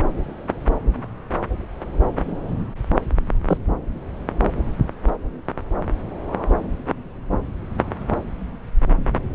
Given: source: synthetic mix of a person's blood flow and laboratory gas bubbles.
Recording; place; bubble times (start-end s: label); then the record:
Doppler ultrasound of blood flow; subclavian vein
3.47-3.58 s: bubbles
From the record:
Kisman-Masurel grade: 113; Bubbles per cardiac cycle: 1 to 2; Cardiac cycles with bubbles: 1 to 10%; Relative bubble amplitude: loud (0.450 to 0.775); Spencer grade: 1 (occasional bubble signal discernible with the cardiac motion signal, with majority of cardiac periods free of bubbles); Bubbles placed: anywhere in the cardiac cycle